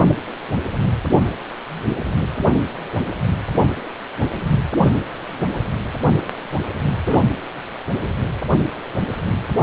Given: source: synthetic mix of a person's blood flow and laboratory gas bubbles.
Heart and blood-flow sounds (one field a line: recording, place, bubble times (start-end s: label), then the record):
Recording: Doppler ultrasound of blood flow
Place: precordium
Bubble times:
6.92-7.25 s: bubbles
8.51-8.57 s: bubbles
From the record:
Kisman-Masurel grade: 121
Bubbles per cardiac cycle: 1 to 2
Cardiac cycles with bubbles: 10 to 50%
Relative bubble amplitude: barely perceptible (0.100 to 0.250)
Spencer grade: 2 (many but less than half of the cardiac periods contain bubble signals, singularly or in groups)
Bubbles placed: anywhere in the cardiac cycle